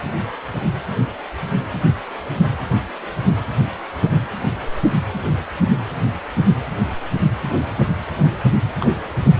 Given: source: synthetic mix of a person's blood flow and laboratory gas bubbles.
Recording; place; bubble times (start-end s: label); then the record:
Doppler ultrasound of blood flow; precordium
8.80-8.86 s: bubbles
9.23-9.34 s: bubbles
From the record:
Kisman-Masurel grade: 111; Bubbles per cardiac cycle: 1 to 2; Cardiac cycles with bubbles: 1 to 10%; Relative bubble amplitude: barely perceptible (0.100 to 0.250); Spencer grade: 1 (occasional bubble signal discernible with the cardiac motion signal, with majority of cardiac periods free of bubbles); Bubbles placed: anywhere in the cardiac cycle